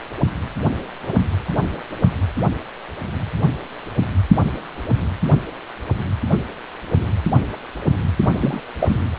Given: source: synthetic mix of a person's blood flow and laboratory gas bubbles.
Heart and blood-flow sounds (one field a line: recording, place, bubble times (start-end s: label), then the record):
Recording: Doppler ultrasound of blood flow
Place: precordium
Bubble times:
1.07-1.14 s: bubbles
8.32-8.61 s: bubbles
8.79-8.99 s: bubbles
From the record:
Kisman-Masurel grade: 122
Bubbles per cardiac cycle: 1 to 2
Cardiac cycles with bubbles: 10 to 50%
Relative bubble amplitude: moderate (0.250 to 0.450)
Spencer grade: 2 (many but less than half of the cardiac periods contain bubble signals, singularly or in groups)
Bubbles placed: anywhere in the cardiac cycle